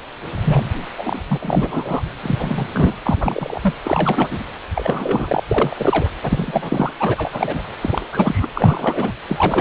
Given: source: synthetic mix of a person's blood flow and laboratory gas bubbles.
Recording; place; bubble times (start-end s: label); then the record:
Doppler ultrasound of blood flow; precordium
0.43-0.71 s: bubbles
0.97-1.19 s: bubbles
1.27-1.38 s: bubbles
1.40-2.02 s: bubbles
2.23-2.68 s: bubbles
2.73-2.95 s: bubbles
3.06-3.59 s: bubbles
3.62-3.74 s: bubbles
3.83-4.46 s: bubbles
4.75-5.42 s: bubbles
5.49-6.10 s: bubbles
6.23-6.92 s: bubbles
7.00-7.62 s: bubbles
7.82-8.06 s: bubbles
8.11-8.48 s: bubbles
8.54-9.13 s: bubbles
9.28-9.61 s: bubbles
From the record:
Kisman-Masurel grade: 343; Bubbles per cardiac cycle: rolling drumbeat, 9 or more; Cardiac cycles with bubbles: 100%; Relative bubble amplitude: loud (0.450 to 0.775); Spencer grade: 3 (all of the cardiac periods contain showers or single bubble signals, but not dominating or overriding the cardiac motion signals); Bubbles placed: anywhere in the cardiac cycle